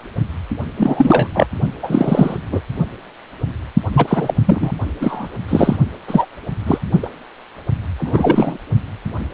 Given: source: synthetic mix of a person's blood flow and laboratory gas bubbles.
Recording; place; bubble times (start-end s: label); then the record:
Doppler ultrasound of blood flow; precordium
0.77-1.28 s: bubbles
1.34-1.46 s: bubbles
1.82-2.38 s: bubbles
2.52-2.61 s: bubbles
3.94-4.35 s: bubbles
4.45-4.72 s: bubbles
5.01-5.28 s: bubbles
5.48-5.77 s: bubbles
6.08-6.25 s: bubbles
6.66-6.78 s: bubbles
7.03-7.10 s: bubbles
7.99-8.58 s: bubbles
From the record:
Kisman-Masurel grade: 233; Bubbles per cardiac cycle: several, 3 to 8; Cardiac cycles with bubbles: 50 to 99%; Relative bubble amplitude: loud (0.450 to 0.775); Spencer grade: 3 (all of the cardiac periods contain showers or single bubble signals, but not dominating or overriding the cardiac motion signals); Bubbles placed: only in the low amplitude regions of the cardiac cycle